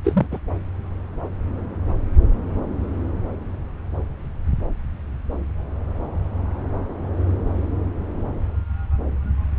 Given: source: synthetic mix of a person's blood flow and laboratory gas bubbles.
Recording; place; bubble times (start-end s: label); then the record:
Doppler ultrasound of blood flow; subclavian vein
0.04-0.27 s: bubbles
0.32-0.39 s: bubbles
From the record:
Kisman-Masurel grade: 212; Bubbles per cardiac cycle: several, 3 to 8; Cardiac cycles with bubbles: 1 to 10%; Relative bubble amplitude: moderate (0.250 to 0.450); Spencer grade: 1 (occasional bubble signal discernible with the cardiac motion signal, with majority of cardiac periods free of bubbles); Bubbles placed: anywhere in the cardiac cycle